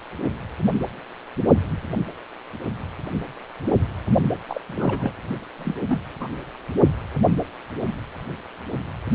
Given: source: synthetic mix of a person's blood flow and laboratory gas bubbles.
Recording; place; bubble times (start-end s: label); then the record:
Doppler ultrasound of blood flow; precordium
4.48-4.61 s: bubbles
4.67-5.12 s: bubbles
5.58-5.74 s: bubbles
5.88-6.00 s: bubbles
6.20-6.28 s: bubbles
From the record:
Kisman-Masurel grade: 221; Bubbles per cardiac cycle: several, 3 to 8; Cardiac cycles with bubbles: 10 to 50%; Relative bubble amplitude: barely perceptible (0.100 to 0.250); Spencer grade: 2 (many but less than half of the cardiac periods contain bubble signals, singularly or in groups); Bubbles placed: only in the low amplitude regions of the cardiac cycle